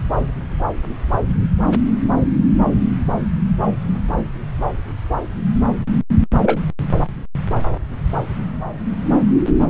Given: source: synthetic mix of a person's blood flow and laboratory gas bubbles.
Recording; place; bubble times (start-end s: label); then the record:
Doppler ultrasound of blood flow; subclavian vein
6.42-6.59 s: bubbles
From the record:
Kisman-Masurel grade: 112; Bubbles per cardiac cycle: 1 to 2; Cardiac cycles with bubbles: 1 to 10%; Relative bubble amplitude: moderate (0.250 to 0.450); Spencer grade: 1 (occasional bubble signal discernible with the cardiac motion signal, with majority of cardiac periods free of bubbles); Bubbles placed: anywhere in the cardiac cycle